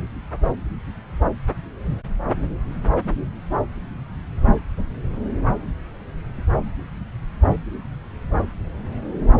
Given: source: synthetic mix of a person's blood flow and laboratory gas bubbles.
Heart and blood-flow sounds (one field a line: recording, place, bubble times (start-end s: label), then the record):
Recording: Doppler ultrasound of blood flow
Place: subclavian vein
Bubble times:
no bubbles
From the record:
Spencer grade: 0 (complete lack of bubble signals)